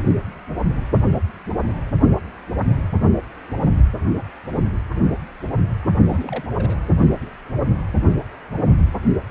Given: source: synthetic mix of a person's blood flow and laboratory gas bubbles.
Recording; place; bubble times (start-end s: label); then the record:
Doppler ultrasound of blood flow; precordium
6.03-6.44 s: bubbles
6.54-6.78 s: bubbles
From the record:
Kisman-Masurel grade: 221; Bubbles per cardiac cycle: several, 3 to 8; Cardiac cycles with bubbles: 10 to 50%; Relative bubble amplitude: barely perceptible (0.100 to 0.250); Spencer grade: 2 (many but less than half of the cardiac periods contain bubble signals, singularly or in groups); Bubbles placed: anywhere in the cardiac cycle